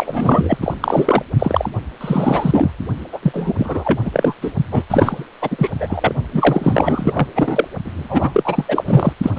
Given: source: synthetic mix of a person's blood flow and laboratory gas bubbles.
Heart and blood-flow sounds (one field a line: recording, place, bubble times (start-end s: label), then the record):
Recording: Doppler ultrasound of blood flow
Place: precordium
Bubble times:
0.00-0.57 s: bubbles
0.61-0.74 s: bubbles
0.80-1.23 s: bubbles
1.39-1.70 s: bubbles
2.00-2.72 s: bubbles
3.12-3.19 s: bubbles
3.22-3.53 s: bubbles
3.58-3.99 s: bubbles
4.04-4.34 s: bubbles
4.41-4.51 s: bubbles
4.71-4.84 s: bubbles
4.90-5.27 s: bubbles
5.42-5.70 s: bubbles
5.72-6.13 s: bubbles
6.33-7.28 s: bubbles
7.34-7.68 s: bubbles
7.84-8.65 s: bubbles
8.68-9.13 s: bubbles
9.22-9.30 s: bubbles
9.36-9.39 s: bubbles
From the record:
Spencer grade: 4 (maximum detectable bubble signal sounding continuously throughout systole and diastole of every cardiac period, and overriding the amplitude of the normal cardiac signals)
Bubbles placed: only in the low amplitude regions of the cardiac cycle